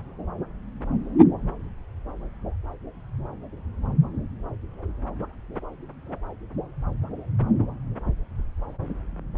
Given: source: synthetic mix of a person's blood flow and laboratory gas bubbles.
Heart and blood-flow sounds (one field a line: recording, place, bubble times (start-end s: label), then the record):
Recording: Doppler ultrasound of blood flow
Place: subclavian vein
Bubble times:
no bubbles
From the record:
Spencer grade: 0 (complete lack of bubble signals)